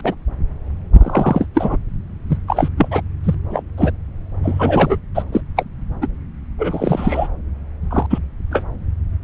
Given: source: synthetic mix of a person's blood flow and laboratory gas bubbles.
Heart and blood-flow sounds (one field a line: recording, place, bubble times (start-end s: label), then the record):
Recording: Doppler ultrasound of blood flow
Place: subclavian vein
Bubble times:
0.03-0.15 s: bubbles
0.98-1.46 s: bubbles
1.54-1.77 s: bubbles
2.29-2.38 s: bubbles
2.47-2.69 s: bubbles
2.77-2.88 s: bubbles
2.91-3.02 s: bubbles
3.23-3.35 s: bubbles
3.50-3.63 s: bubbles
3.77-3.92 s: bubbles
4.42-4.97 s: bubbles
5.14-5.23 s: bubbles
5.32-5.40 s: bubbles
5.56-5.64 s: bubbles
6.01-6.07 s: bubbles
6.58-7.28 s: bubbles
7.90-8.06 s: bubbles
8.10-8.19 s: bubbles
8.51-8.63 s: bubbles
From the record:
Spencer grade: 3 (all of the cardiac periods contain showers or single bubble signals, but not dominating or overriding the cardiac motion signals)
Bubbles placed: anywhere in the cardiac cycle